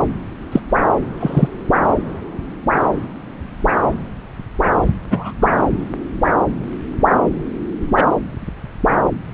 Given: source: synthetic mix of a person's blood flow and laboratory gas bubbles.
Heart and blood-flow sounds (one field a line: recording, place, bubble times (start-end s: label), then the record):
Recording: Doppler ultrasound of blood flow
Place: subclavian vein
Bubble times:
0.52-0.60 s: bubbles
1.20-1.48 s: bubbles
5.10-5.33 s: bubbles
5.42-5.47 s: bubbles
7.97-8.04 s: bubbles
From the record:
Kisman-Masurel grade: 123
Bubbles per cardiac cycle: 1 to 2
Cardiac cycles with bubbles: 10 to 50%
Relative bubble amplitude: loud (0.450 to 0.775)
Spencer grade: 2 (many but less than half of the cardiac periods contain bubble signals, singularly or in groups)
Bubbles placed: anywhere in the cardiac cycle